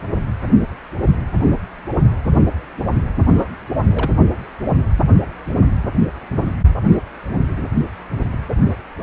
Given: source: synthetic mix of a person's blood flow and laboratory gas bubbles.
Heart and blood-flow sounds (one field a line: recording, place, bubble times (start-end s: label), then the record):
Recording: Doppler ultrasound of blood flow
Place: precordium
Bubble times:
3.35-3.53 s: bubbles
3.90-4.11 s: bubbles
From the record:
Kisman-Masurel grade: 111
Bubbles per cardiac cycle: 1 to 2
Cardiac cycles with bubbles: 1 to 10%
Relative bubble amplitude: barely perceptible (0.100 to 0.250)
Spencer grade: 1 (occasional bubble signal discernible with the cardiac motion signal, with majority of cardiac periods free of bubbles)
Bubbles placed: anywhere in the cardiac cycle